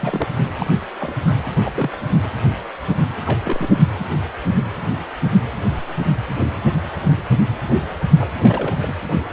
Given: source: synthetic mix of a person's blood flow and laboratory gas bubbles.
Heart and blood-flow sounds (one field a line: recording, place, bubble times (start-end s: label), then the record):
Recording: Doppler ultrasound of blood flow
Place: precordium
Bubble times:
0.01-0.28 s: bubbles
0.59-0.66 s: bubbles
1.00-1.17 s: bubbles
1.26-1.31 s: bubbles
1.59-1.96 s: bubbles
2.00-2.09 s: bubbles
2.24-2.29 s: bubbles
3.24-3.75 s: bubbles
8.16-8.75 s: bubbles
8.81-8.93 s: bubbles
From the record:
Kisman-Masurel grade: 221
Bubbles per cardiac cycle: several, 3 to 8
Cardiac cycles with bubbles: 10 to 50%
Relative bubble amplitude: barely perceptible (0.100 to 0.250)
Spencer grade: 2 (many but less than half of the cardiac periods contain bubble signals, singularly or in groups)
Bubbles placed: anywhere in the cardiac cycle